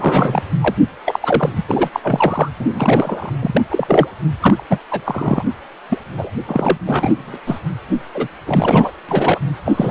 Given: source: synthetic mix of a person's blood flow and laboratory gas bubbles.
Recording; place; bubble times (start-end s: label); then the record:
Doppler ultrasound of blood flow; precordium
0.00-0.42 s: bubbles
0.60-0.74 s: bubbles
1.05-1.50 s: bubbles
1.55-1.65 s: bubbles
1.68-1.90 s: bubbles
1.93-2.00 s: bubbles
2.03-2.49 s: bubbles
2.60-3.30 s: bubbles
3.42-3.62 s: bubbles
3.71-4.08 s: bubbles
4.39-4.63 s: bubbles
4.70-4.78 s: bubbles
4.90-5.01 s: bubbles
5.04-5.45 s: bubbles
5.89-5.98 s: bubbles
6.17-6.31 s: bubbles
6.47-6.77 s: bubbles
6.86-7.38 s: bubbles
7.46-7.59 s: bubbles
8.14-8.28 s: bubbles
8.46-8.91 s: bubbles
9.08-9.39 s: bubbles
9.65-9.91 s: bubbles
From the record:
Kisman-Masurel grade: 343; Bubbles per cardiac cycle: rolling drumbeat, 9 or more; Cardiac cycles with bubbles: 100%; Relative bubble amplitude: loud (0.450 to 0.775); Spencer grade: 3 (all of the cardiac periods contain showers or single bubble signals, but not dominating or overriding the cardiac motion signals); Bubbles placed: anywhere in the cardiac cycle